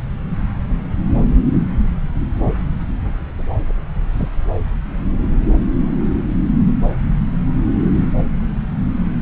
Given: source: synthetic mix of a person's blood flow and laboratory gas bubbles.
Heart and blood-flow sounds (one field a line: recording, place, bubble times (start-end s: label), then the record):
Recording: Doppler ultrasound of blood flow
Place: subclavian vein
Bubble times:
4.13-4.29 s: bubbles
From the record:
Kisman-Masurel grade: 122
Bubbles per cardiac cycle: 1 to 2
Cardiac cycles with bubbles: 10 to 50%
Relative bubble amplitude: moderate (0.250 to 0.450)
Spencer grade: 2 (many but less than half of the cardiac periods contain bubble signals, singularly or in groups)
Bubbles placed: anywhere in the cardiac cycle